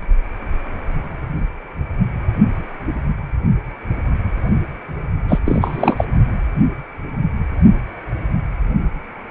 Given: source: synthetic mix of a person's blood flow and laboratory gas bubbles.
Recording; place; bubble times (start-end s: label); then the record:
Doppler ultrasound of blood flow; precordium
5.28-5.39 s: bubbles
5.45-6.04 s: bubbles
From the record:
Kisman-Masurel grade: 213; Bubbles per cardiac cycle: several, 3 to 8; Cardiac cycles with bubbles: 1 to 10%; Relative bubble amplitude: loud (0.450 to 0.775); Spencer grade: 1 (occasional bubble signal discernible with the cardiac motion signal, with majority of cardiac periods free of bubbles); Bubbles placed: only in the low amplitude regions of the cardiac cycle